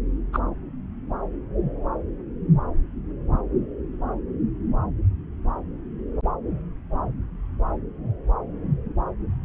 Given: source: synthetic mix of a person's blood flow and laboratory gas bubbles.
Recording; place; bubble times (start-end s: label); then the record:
Doppler ultrasound of blood flow; subclavian vein
0.33-0.39 s: bubbles
From the record:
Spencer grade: 1 (occasional bubble signal discernible with the cardiac motion signal, with majority of cardiac periods free of bubbles); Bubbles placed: anywhere in the cardiac cycle